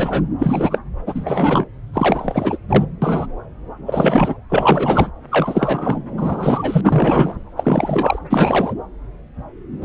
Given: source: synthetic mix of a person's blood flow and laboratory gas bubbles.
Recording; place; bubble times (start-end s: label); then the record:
Doppler ultrasound of blood flow; subclavian vein
0.00-0.23 s: bubbles
0.39-0.79 s: bubbles
1.06-1.65 s: bubbles
1.93-2.57 s: bubbles
2.69-2.85 s: bubbles
3.02-3.27 s: bubbles
3.86-4.35 s: bubbles
4.50-5.11 s: bubbles
5.31-6.02 s: bubbles
6.17-7.35 s: bubbles
7.56-8.19 s: bubbles
8.30-8.74 s: bubbles
9.82-9.85 s: bubbles
From the record:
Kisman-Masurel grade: 333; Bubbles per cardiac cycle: rolling drumbeat, 9 or more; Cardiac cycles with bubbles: 50 to 99%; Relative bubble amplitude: loud (0.450 to 0.775); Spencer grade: 3 (all of the cardiac periods contain showers or single bubble signals, but not dominating or overriding the cardiac motion signals); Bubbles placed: anywhere in the cardiac cycle